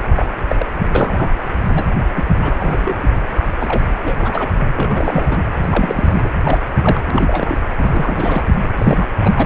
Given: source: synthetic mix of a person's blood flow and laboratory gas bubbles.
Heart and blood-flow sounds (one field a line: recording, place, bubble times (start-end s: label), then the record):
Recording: Doppler ultrasound of blood flow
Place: precordium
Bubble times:
0.14-0.25 s: bubbles
0.49-0.66 s: bubbles
0.95-1.29 s: bubbles
1.64-1.89 s: bubbles
2.15-2.24 s: bubbles
2.42-2.54 s: bubbles
2.58-2.97 s: bubbles
3.59-3.88 s: bubbles
4.04-4.15 s: bubbles
4.17-4.50 s: bubbles
4.75-5.44 s: bubbles
5.62-6.29 s: bubbles
6.44-6.58 s: bubbles
6.82-7.00 s: bubbles
7.08-7.58 s: bubbles
7.77-8.42 s: bubbles
8.78-9.07 s: bubbles
9.24-9.46 s: bubbles
From the record:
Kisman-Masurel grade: 232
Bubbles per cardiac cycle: several, 3 to 8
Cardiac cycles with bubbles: 50 to 99%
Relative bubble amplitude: moderate (0.250 to 0.450)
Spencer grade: 3 (all of the cardiac periods contain showers or single bubble signals, but not dominating or overriding the cardiac motion signals)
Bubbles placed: anywhere in the cardiac cycle